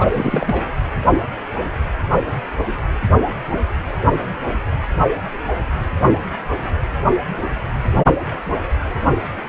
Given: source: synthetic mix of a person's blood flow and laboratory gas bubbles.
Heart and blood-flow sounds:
Doppler ultrasound of blood flow; precordium
0.00-0.06 s: bubbles
0.10-0.70 s: bubbles
From the record:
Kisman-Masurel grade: 222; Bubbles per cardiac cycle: several, 3 to 8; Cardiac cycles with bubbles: 10 to 50%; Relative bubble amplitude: moderate (0.250 to 0.450); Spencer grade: 2 (many but less than half of the cardiac periods contain bubble signals, singularly or in groups); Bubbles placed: anywhere in the cardiac cycle

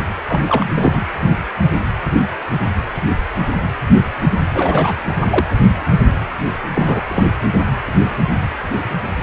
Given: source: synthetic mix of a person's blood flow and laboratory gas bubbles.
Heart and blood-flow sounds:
Doppler ultrasound of blood flow; precordium
0.27-0.40 s: bubbles
0.46-1.01 s: bubbles
4.53-4.96 s: bubbles
5.25-5.45 s: bubbles
6.75-7.24 s: bubbles
From the record:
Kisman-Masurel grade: 222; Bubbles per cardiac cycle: several, 3 to 8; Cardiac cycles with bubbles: 10 to 50%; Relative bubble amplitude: moderate (0.250 to 0.450); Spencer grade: 2 (many but less than half of the cardiac periods contain bubble signals, singularly or in groups); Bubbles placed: anywhere in the cardiac cycle

